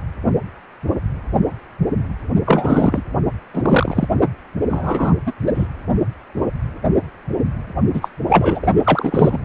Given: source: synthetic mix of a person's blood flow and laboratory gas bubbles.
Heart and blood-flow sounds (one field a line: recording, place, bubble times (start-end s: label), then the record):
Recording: Doppler ultrasound of blood flow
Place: precordium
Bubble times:
2.46-3.02 s: bubbles
3.54-4.08 s: bubbles
4.68-5.14 s: bubbles
5.25-5.32 s: bubbles
5.46-5.67 s: bubbles
7.93-8.09 s: bubbles
8.29-8.67 s: bubbles
8.84-9.38 s: bubbles
From the record:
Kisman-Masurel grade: 233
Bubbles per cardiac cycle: several, 3 to 8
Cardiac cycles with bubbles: 50 to 99%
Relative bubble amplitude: loud (0.450 to 0.775)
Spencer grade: 3 (all of the cardiac periods contain showers or single bubble signals, but not dominating or overriding the cardiac motion signals)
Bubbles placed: only in the low amplitude regions of the cardiac cycle